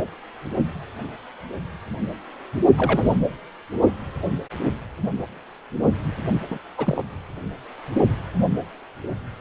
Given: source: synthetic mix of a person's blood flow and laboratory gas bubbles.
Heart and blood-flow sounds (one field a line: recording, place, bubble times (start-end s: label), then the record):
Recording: Doppler ultrasound of blood flow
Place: precordium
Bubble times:
2.77-3.18 s: bubbles
6.50-6.58 s: bubbles
6.77-7.04 s: bubbles
From the record:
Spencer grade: 1 (occasional bubble signal discernible with the cardiac motion signal, with majority of cardiac periods free of bubbles)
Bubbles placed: anywhere in the cardiac cycle